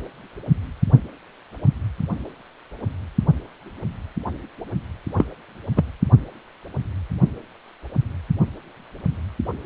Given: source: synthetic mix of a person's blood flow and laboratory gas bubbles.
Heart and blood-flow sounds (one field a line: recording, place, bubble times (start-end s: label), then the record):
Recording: Doppler ultrasound of blood flow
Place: precordium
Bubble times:
5.17-5.25 s: bubbles
5.76-5.84 s: bubbles
From the record:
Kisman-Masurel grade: 113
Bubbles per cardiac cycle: 1 to 2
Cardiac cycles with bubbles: 1 to 10%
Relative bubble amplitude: loud (0.450 to 0.775)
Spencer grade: 1 (occasional bubble signal discernible with the cardiac motion signal, with majority of cardiac periods free of bubbles)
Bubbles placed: only in the low amplitude regions of the cardiac cycle